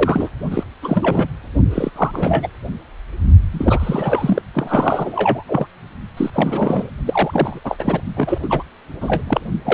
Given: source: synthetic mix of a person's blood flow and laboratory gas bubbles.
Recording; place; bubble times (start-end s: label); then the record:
Doppler ultrasound of blood flow; precordium
0.00-0.30 s: bubbles
0.51-0.64 s: bubbles
0.82-1.28 s: bubbles
1.70-1.90 s: bubbles
1.96-2.48 s: bubbles
3.52-4.42 s: bubbles
4.54-5.44 s: bubbles
5.47-5.67 s: bubbles
6.17-6.30 s: bubbles
6.33-6.90 s: bubbles
7.05-7.60 s: bubbles
7.64-8.01 s: bubbles
8.17-8.38 s: bubbles
8.42-8.63 s: bubbles
9.01-9.23 s: bubbles
9.27-9.40 s: bubbles
9.64-9.74 s: bubbles
From the record:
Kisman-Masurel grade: 342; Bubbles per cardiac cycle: rolling drumbeat, 9 or more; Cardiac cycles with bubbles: 100%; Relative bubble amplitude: moderate (0.250 to 0.450); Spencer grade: 3 (all of the cardiac periods contain showers or single bubble signals, but not dominating or overriding the cardiac motion signals); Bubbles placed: only in the low amplitude regions of the cardiac cycle